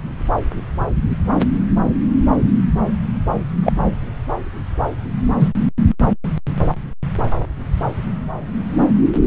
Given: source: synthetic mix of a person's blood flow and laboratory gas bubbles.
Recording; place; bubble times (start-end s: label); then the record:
Doppler ultrasound of blood flow; subclavian vein
3.63-3.73 s: bubbles
5.39-5.50 s: bubbles
From the record:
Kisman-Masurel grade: 123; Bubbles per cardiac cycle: 1 to 2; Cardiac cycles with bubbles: 10 to 50%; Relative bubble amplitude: loud (0.450 to 0.775); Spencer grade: 2 (many but less than half of the cardiac periods contain bubble signals, singularly or in groups); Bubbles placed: anywhere in the cardiac cycle